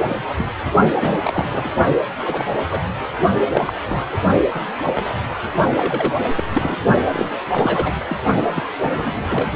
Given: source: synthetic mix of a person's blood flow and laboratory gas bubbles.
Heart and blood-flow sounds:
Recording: Doppler ultrasound of blood flow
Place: precordium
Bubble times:
0.00-0.15 s: bubbles
0.37-0.46 s: bubbles
0.64-0.71 s: bubbles
0.91-0.95 s: bubbles
1.00-1.70 s: bubbles
2.25-2.56 s: bubbles
2.71-2.80 s: bubbles
3.52-3.73 s: bubbles
3.87-4.18 s: bubbles
4.54-4.62 s: bubbles
4.77-4.83 s: bubbles
4.85-4.92 s: bubbles
4.95-5.13 s: bubbles
5.75-6.13 s: bubbles
6.17-6.26 s: bubbles
6.35-6.44 s: bubbles
6.54-6.75 s: bubbles
7.11-7.29 s: bubbles
7.52-7.94 s: bubbles
8.08-8.16 s: bubbles
8.54-8.63 s: bubbles
8.82-9.51 s: bubbles
From the record:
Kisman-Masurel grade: 242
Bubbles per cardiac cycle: several, 3 to 8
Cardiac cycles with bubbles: 100%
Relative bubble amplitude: moderate (0.250 to 0.450)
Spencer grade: 3 (all of the cardiac periods contain showers or single bubble signals, but not dominating or overriding the cardiac motion signals)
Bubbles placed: only in the low amplitude regions of the cardiac cycle

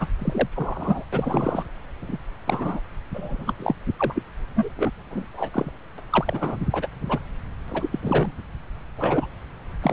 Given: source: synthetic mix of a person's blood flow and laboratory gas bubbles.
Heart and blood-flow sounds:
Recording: Doppler ultrasound of blood flow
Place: subclavian vein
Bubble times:
0.00-0.07 s: bubbles
0.18-0.49 s: bubbles
0.55-1.04 s: bubbles
1.12-1.64 s: bubbles
2.02-2.18 s: bubbles
2.46-2.81 s: bubbles
3.14-3.54 s: bubbles
3.59-3.76 s: bubbles
3.99-4.22 s: bubbles
4.56-4.69 s: bubbles
4.77-4.91 s: bubbles
5.11-5.25 s: bubbles
5.33-5.50 s: bubbles
5.54-5.71 s: bubbles
5.98-6.01 s: bubbles
6.10-6.57 s: bubbles
6.71-6.87 s: bubbles
7.05-7.19 s: bubbles
7.68-7.89 s: bubbles
7.92-7.99 s: bubbles
8.02-8.31 s: bubbles
8.97-9.29 s: bubbles
9.83-9.93 s: bubbles
From the record:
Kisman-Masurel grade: 242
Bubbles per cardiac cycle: several, 3 to 8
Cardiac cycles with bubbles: 100%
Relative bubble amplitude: moderate (0.250 to 0.450)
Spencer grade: 3 (all of the cardiac periods contain showers or single bubble signals, but not dominating or overriding the cardiac motion signals)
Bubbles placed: anywhere in the cardiac cycle

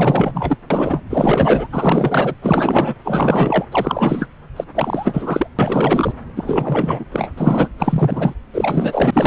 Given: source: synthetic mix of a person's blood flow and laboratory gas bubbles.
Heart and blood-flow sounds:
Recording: Doppler ultrasound of blood flow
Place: subclavian vein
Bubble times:
0.00-0.57 s: bubbles
0.70-1.00 s: bubbles
1.09-1.68 s: bubbles
1.72-2.34 s: bubbles
2.42-2.95 s: bubbles
3.04-3.65 s: bubbles
3.71-4.26 s: bubbles
4.56-4.64 s: bubbles
4.75-5.47 s: bubbles
5.58-6.12 s: bubbles
6.36-7.05 s: bubbles
7.11-7.31 s: bubbles
7.38-7.69 s: bubbles
7.78-8.34 s: bubbles
8.53-9.27 s: bubbles
From the record:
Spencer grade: 4 (maximum detectable bubble signal sounding continuously throughout systole and diastole of every cardiac period, and overriding the amplitude of the normal cardiac signals)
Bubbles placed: anywhere in the cardiac cycle

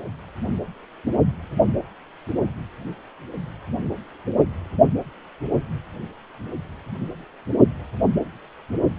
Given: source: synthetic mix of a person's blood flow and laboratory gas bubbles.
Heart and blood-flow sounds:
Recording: Doppler ultrasound of blood flow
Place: precordium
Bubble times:
no bubbles
From the record:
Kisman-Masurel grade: 000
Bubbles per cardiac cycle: 0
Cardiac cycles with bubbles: 0%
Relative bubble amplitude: no bubbles discernible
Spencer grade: 0 (complete lack of bubble signals)

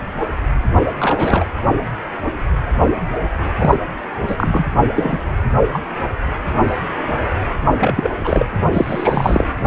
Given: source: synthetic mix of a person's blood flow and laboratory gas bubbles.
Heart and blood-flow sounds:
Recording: Doppler ultrasound of blood flow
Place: precordium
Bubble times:
0.99-1.46 s: bubbles
3.58-3.75 s: bubbles
4.27-4.71 s: bubbles
4.96-5.20 s: bubbles
5.72-5.79 s: bubbles
7.80-8.46 s: bubbles
8.72-9.46 s: bubbles
From the record:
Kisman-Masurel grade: 233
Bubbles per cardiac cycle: several, 3 to 8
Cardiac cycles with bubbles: 50 to 99%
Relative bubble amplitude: loud (0.450 to 0.775)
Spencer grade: 3 (all of the cardiac periods contain showers or single bubble signals, but not dominating or overriding the cardiac motion signals)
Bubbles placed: only in the low amplitude regions of the cardiac cycle

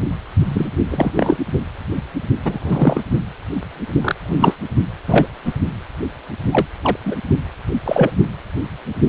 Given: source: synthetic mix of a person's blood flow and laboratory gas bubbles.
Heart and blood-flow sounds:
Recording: Doppler ultrasound of blood flow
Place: precordium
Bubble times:
0.45-0.69 s: bubbles
0.90-1.38 s: bubbles
2.44-3.02 s: bubbles
4.02-4.15 s: bubbles
4.25-4.55 s: bubbles
5.07-5.26 s: bubbles
5.45-5.53 s: bubbles
6.51-6.66 s: bubbles
6.83-6.97 s: bubbles
7.05-7.15 s: bubbles
7.85-8.12 s: bubbles
From the record:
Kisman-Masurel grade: 233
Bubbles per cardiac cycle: several, 3 to 8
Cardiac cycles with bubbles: 50 to 99%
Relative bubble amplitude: loud (0.450 to 0.775)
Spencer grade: 3 (all of the cardiac periods contain showers or single bubble signals, but not dominating or overriding the cardiac motion signals)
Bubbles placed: only in the low amplitude regions of the cardiac cycle

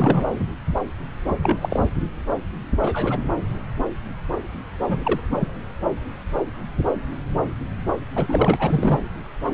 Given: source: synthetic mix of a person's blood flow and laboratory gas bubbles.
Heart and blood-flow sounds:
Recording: Doppler ultrasound of blood flow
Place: subclavian vein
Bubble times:
0.00-0.39 s: bubbles
1.43-1.56 s: bubbles
1.61-1.80 s: bubbles
2.83-3.18 s: bubbles
4.84-5.20 s: bubbles
5.30-5.48 s: bubbles
8.16-8.56 s: bubbles
8.59-8.99 s: bubbles
From the record:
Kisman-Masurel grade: 232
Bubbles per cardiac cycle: several, 3 to 8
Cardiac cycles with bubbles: 50 to 99%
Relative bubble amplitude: moderate (0.250 to 0.450)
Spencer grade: 3 (all of the cardiac periods contain showers or single bubble signals, but not dominating or overriding the cardiac motion signals)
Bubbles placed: anywhere in the cardiac cycle

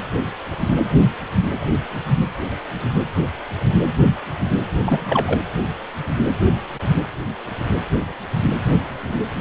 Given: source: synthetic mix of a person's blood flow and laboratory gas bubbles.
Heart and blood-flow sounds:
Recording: Doppler ultrasound of blood flow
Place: precordium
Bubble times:
4.86-5.39 s: bubbles
From the record:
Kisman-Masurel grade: 212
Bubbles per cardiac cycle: several, 3 to 8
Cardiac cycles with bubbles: 1 to 10%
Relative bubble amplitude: moderate (0.250 to 0.450)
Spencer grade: 1 (occasional bubble signal discernible with the cardiac motion signal, with majority of cardiac periods free of bubbles)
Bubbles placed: anywhere in the cardiac cycle

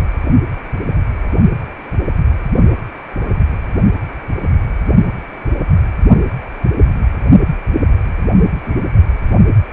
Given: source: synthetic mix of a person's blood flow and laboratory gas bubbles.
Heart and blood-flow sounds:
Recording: Doppler ultrasound of blood flow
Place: precordium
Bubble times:
8.63-8.76 s: bubbles
From the record:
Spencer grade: 1 (occasional bubble signal discernible with the cardiac motion signal, with majority of cardiac periods free of bubbles)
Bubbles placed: only in the low amplitude regions of the cardiac cycle

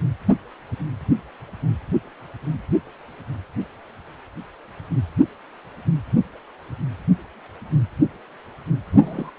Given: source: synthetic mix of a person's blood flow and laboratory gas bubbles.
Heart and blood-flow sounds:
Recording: Doppler ultrasound of blood flow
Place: precordium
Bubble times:
8.93-9.31 s: bubbles
From the record:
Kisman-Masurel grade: 213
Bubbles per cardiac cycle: several, 3 to 8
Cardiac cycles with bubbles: 1 to 10%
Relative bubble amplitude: loud (0.450 to 0.775)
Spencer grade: 1 (occasional bubble signal discernible with the cardiac motion signal, with majority of cardiac periods free of bubbles)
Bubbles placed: anywhere in the cardiac cycle

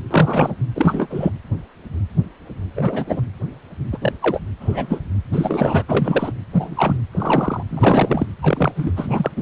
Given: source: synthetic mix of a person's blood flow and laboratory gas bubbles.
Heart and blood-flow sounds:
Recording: Doppler ultrasound of blood flow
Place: precordium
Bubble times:
0.10-0.55 s: bubbles
0.74-1.30 s: bubbles
2.75-3.21 s: bubbles
3.92-3.98 s: bubbles
4.01-4.12 s: bubbles
4.21-4.40 s: bubbles
4.60-5.00 s: bubbles
5.32-5.83 s: bubbles
5.88-6.32 s: bubbles
6.52-6.97 s: bubbles
7.11-7.62 s: bubbles
7.69-8.27 s: bubbles
8.42-8.72 s: bubbles
8.75-8.92 s: bubbles
8.96-9.31 s: bubbles
9.37-9.42 s: bubbles
From the record:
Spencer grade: 3 (all of the cardiac periods contain showers or single bubble signals, but not dominating or overriding the cardiac motion signals)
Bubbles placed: anywhere in the cardiac cycle

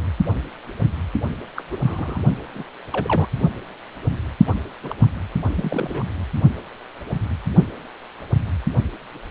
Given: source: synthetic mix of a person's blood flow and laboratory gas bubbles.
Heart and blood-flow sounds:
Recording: Doppler ultrasound of blood flow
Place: precordium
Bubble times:
1.56-1.62 s: bubbles
1.71-1.77 s: bubbles
1.79-2.20 s: bubbles
2.55-2.63 s: bubbles
2.92-3.28 s: bubbles
4.46-4.54 s: bubbles
4.83-4.96 s: bubbles
5.01-5.06 s: bubbles
5.56-6.04 s: bubbles
From the record:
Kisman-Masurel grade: 221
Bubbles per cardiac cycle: several, 3 to 8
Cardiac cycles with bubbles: 10 to 50%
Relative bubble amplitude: barely perceptible (0.100 to 0.250)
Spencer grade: 2 (many but less than half of the cardiac periods contain bubble signals, singularly or in groups)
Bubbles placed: only in the low amplitude regions of the cardiac cycle

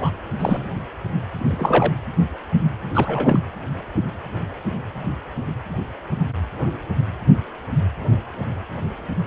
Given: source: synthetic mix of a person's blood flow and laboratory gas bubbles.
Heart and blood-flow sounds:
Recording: Doppler ultrasound of blood flow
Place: precordium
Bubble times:
0.00-0.11 s: bubbles
0.39-0.67 s: bubbles
1.38-1.92 s: bubbles
2.94-3.40 s: bubbles
From the record:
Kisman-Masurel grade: 222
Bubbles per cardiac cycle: several, 3 to 8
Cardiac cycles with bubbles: 10 to 50%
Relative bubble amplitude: moderate (0.250 to 0.450)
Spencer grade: 2 (many but less than half of the cardiac periods contain bubble signals, singularly or in groups)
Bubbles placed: anywhere in the cardiac cycle

